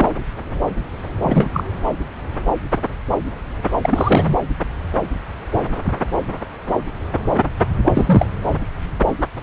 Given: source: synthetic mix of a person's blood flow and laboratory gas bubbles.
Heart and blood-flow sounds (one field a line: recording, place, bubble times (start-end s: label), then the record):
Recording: Doppler ultrasound of blood flow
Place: subclavian vein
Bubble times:
0.00-0.06 s: bubbles
1.21-1.50 s: bubbles
1.53-1.64 s: bubbles
3.81-4.29 s: bubbles
7.85-8.27 s: bubbles
From the record:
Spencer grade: 2 (many but less than half of the cardiac periods contain bubble signals, singularly or in groups)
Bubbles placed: anywhere in the cardiac cycle